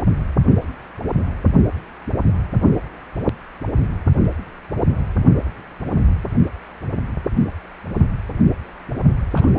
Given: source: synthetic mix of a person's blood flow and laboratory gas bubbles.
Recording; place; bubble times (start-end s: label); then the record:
Doppler ultrasound of blood flow; precordium
0.17-0.33 s: bubbles
9.34-9.49 s: bubbles
From the record:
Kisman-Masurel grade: 121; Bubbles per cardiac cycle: 1 to 2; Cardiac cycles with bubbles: 10 to 50%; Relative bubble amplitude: barely perceptible (0.100 to 0.250); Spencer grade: 2 (many but less than half of the cardiac periods contain bubble signals, singularly or in groups); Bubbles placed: only in the low amplitude regions of the cardiac cycle